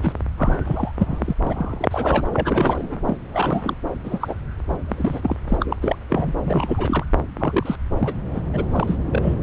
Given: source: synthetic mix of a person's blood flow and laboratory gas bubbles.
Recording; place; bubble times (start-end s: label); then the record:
Doppler ultrasound of blood flow; subclavian vein
0.01-0.12 s: bubbles
0.37-0.91 s: bubbles
0.98-1.33 s: bubbles
1.42-2.26 s: bubbles
2.32-3.02 s: bubbles
3.06-3.17 s: bubbles
3.32-3.77 s: bubbles
4.04-4.35 s: bubbles
4.68-5.36 s: bubbles
5.49-5.77 s: bubbles
5.82-5.96 s: bubbles
6.09-6.33 s: bubbles
6.39-7.04 s: bubbles
7.35-7.76 s: bubbles
7.99-8.14 s: bubbles
8.33-8.42 s: bubbles
8.53-8.64 s: bubbles
8.71-8.96 s: bubbles
9.10-9.36 s: bubbles
From the record:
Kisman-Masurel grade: 232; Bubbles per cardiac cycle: several, 3 to 8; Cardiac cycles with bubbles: 50 to 99%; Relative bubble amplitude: moderate (0.250 to 0.450); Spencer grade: 3 (all of the cardiac periods contain showers or single bubble signals, but not dominating or overriding the cardiac motion signals); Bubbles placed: anywhere in the cardiac cycle